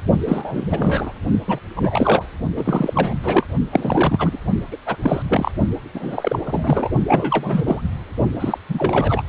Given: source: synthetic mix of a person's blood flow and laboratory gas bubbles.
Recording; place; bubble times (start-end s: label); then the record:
Doppler ultrasound of blood flow; precordium
0.26-1.12 s: bubbles
1.48-1.59 s: bubbles
1.76-2.25 s: bubbles
2.56-3.14 s: bubbles
3.23-3.44 s: bubbles
3.71-4.38 s: bubbles
4.71-4.76 s: bubbles
4.86-4.96 s: bubbles
5.02-5.22 s: bubbles
5.29-5.51 s: bubbles
5.94-6.39 s: bubbles
6.44-6.90 s: bubbles
7.07-7.63 s: bubbles
7.66-7.81 s: bubbles
8.39-8.58 s: bubbles
8.69-9.22 s: bubbles
From the record:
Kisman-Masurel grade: 342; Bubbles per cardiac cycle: rolling drumbeat, 9 or more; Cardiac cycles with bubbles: 100%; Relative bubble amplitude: moderate (0.250 to 0.450); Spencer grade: 3 (all of the cardiac periods contain showers or single bubble signals, but not dominating or overriding the cardiac motion signals); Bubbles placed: only in the low amplitude regions of the cardiac cycle